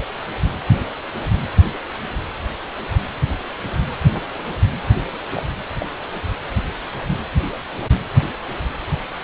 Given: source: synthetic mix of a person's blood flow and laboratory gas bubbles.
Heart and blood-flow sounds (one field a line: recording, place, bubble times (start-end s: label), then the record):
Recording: Doppler ultrasound of blood flow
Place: precordium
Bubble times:
5.33-5.43 s: bubbles
5.78-5.86 s: bubbles
From the record:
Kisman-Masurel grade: 111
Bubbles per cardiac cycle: 1 to 2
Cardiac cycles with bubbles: 1 to 10%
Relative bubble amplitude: barely perceptible (0.100 to 0.250)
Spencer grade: 1 (occasional bubble signal discernible with the cardiac motion signal, with majority of cardiac periods free of bubbles)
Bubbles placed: anywhere in the cardiac cycle